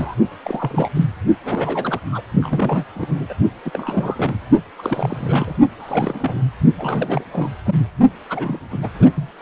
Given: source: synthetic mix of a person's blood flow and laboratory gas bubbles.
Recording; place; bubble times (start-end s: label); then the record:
Doppler ultrasound of blood flow; precordium
0.00-0.16 s: bubbles
0.43-0.90 s: bubbles
0.95-1.05 s: bubbles
1.45-1.99 s: bubbles
2.12-2.21 s: bubbles
2.42-2.84 s: bubbles
2.95-3.34 s: bubbles
3.65-4.36 s: bubbles
4.79-5.57 s: bubbles
5.79-6.42 s: bubbles
6.76-7.24 s: bubbles
7.32-7.50 s: bubbles
7.65-7.75 s: bubbles
8.29-8.59 s: bubbles
8.71-8.89 s: bubbles
8.98-9.09 s: bubbles
9.15-9.31 s: bubbles
From the record:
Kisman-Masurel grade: 342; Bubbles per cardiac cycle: rolling drumbeat, 9 or more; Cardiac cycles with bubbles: 100%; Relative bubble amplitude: moderate (0.250 to 0.450); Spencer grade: 3 (all of the cardiac periods contain showers or single bubble signals, but not dominating or overriding the cardiac motion signals); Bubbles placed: only in the low amplitude regions of the cardiac cycle